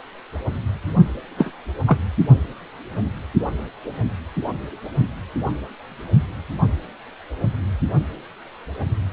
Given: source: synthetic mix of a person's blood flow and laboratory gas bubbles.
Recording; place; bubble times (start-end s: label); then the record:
Doppler ultrasound of blood flow; precordium
1.38-1.53 s: bubbles
1.87-1.99 s: bubbles
From the record:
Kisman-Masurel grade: 113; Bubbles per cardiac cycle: 1 to 2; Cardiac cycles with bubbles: 1 to 10%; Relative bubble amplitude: loud (0.450 to 0.775); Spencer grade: 1 (occasional bubble signal discernible with the cardiac motion signal, with majority of cardiac periods free of bubbles); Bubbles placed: anywhere in the cardiac cycle